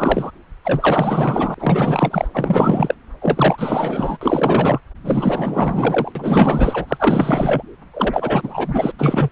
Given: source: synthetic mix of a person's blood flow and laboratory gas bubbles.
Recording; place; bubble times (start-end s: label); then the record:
Doppler ultrasound of blood flow; subclavian vein
0.00-0.31 s: bubbles
0.64-2.28 s: bubbles
2.33-2.95 s: bubbles
3.21-4.17 s: bubbles
4.21-4.80 s: bubbles
5.04-6.12 s: bubbles
6.15-7.62 s: bubbles
7.94-8.92 s: bubbles
8.96-9.29 s: bubbles
From the record:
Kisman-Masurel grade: 444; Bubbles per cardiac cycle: continuous sound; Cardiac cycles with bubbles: 100%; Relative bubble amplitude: maximal (0.775 to 0.999); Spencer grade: 4 (maximum detectable bubble signal sounding continuously throughout systole and diastole of every cardiac period, and overriding the amplitude of the normal cardiac signals); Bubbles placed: anywhere in the cardiac cycle